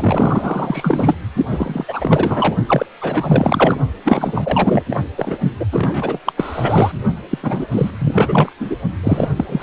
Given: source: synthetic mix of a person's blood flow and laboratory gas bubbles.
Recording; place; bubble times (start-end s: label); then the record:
Doppler ultrasound of blood flow; precordium
0.00-1.15 s: bubbles
1.37-1.46 s: bubbles
1.50-1.85 s: bubbles
1.88-2.56 s: bubbles
2.67-2.86 s: bubbles
3.01-3.80 s: bubbles
4.04-4.83 s: bubbles
4.90-5.00 s: bubbles
5.18-5.38 s: bubbles
5.59-5.66 s: bubbles
5.72-6.20 s: bubbles
6.25-6.33 s: bubbles
6.37-6.92 s: bubbles
7.29-7.38 s: bubbles
7.43-7.66 s: bubbles
7.72-7.91 s: bubbles
7.99-8.52 s: bubbles
8.60-8.75 s: bubbles
9.03-9.29 s: bubbles
9.36-9.45 s: bubbles
9.48-9.62 s: bubbles
From the record:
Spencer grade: 4 (maximum detectable bubble signal sounding continuously throughout systole and diastole of every cardiac period, and overriding the amplitude of the normal cardiac signals); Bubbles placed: only in the low amplitude regions of the cardiac cycle